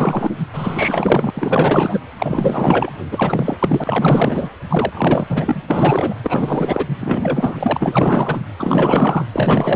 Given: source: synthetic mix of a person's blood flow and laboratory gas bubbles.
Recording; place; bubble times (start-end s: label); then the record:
Doppler ultrasound of blood flow; precordium
0.00-0.31 s: bubbles
0.53-1.30 s: bubbles
1.33-1.98 s: bubbles
2.19-2.92 s: bubbles
3.11-4.50 s: bubbles
4.69-5.25 s: bubbles
5.29-5.62 s: bubbles
5.70-6.15 s: bubbles
6.23-6.87 s: bubbles
6.99-8.40 s: bubbles
8.59-9.25 s: bubbles
9.32-9.76 s: bubbles
From the record:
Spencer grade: 4 (maximum detectable bubble signal sounding continuously throughout systole and diastole of every cardiac period, and overriding the amplitude of the normal cardiac signals); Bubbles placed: anywhere in the cardiac cycle